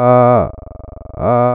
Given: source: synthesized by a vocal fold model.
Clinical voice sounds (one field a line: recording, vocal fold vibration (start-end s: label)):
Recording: sustained vowel that changes in the middle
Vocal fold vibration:
0.00-0.33 s: 122.7 Hz, open quotient 0.51
0.53-1.13 s: 23.4 Hz, open quotient 0.26
1.33-1.55 s: 122.7 Hz, open quotient 0.51